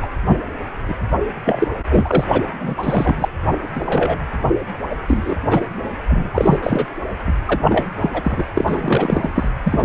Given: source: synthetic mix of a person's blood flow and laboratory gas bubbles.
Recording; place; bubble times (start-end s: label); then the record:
Doppler ultrasound of blood flow; precordium
0.02-0.07 s: bubbles
0.27-0.40 s: bubbles
0.88-0.94 s: bubbles
1.44-1.68 s: bubbles
1.90-2.24 s: bubbles
2.32-2.42 s: bubbles
2.58-3.28 s: bubbles
3.75-4.18 s: bubbles
4.89-4.95 s: bubbles
5.07-5.35 s: bubbles
5.50-5.66 s: bubbles
6.08-6.30 s: bubbles
6.33-6.58 s: bubbles
6.62-6.86 s: bubbles
7.26-7.33 s: bubbles
7.46-7.59 s: bubbles
7.64-7.87 s: bubbles
8.02-8.10 s: bubbles
8.13-8.44 s: bubbles
8.54-9.30 s: bubbles
9.35-9.49 s: bubbles
9.64-9.85 s: bubbles
From the record:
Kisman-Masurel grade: 333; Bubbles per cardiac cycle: rolling drumbeat, 9 or more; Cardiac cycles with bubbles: 50 to 99%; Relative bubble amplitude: loud (0.450 to 0.775); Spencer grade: 3 (all of the cardiac periods contain showers or single bubble signals, but not dominating or overriding the cardiac motion signals); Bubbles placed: anywhere in the cardiac cycle